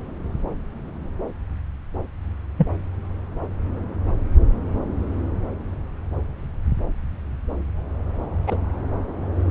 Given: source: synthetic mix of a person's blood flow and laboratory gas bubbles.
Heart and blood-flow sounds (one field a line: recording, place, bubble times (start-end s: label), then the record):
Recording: Doppler ultrasound of blood flow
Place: subclavian vein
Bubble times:
2.58-2.68 s: bubbles
8.47-8.58 s: bubbles
From the record:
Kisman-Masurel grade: 122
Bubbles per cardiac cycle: 1 to 2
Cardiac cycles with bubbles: 10 to 50%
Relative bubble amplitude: moderate (0.250 to 0.450)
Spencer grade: 2 (many but less than half of the cardiac periods contain bubble signals, singularly or in groups)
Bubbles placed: anywhere in the cardiac cycle